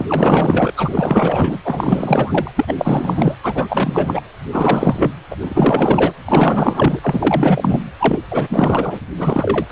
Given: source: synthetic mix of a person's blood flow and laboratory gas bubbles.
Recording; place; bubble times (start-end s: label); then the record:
Doppler ultrasound of blood flow; precordium
0.00-0.72 s: bubbles
0.76-1.58 s: bubbles
1.64-2.51 s: bubbles
2.56-3.36 s: bubbles
3.43-4.22 s: bubbles
4.52-5.12 s: bubbles
5.30-5.36 s: bubbles
5.41-6.12 s: bubbles
6.25-6.99 s: bubbles
7.02-7.83 s: bubbles
8.00-8.19 s: bubbles
8.30-8.99 s: bubbles
9.17-9.66 s: bubbles
9.69-9.72 s: bubbles
From the record:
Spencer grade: 4 (maximum detectable bubble signal sounding continuously throughout systole and diastole of every cardiac period, and overriding the amplitude of the normal cardiac signals); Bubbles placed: anywhere in the cardiac cycle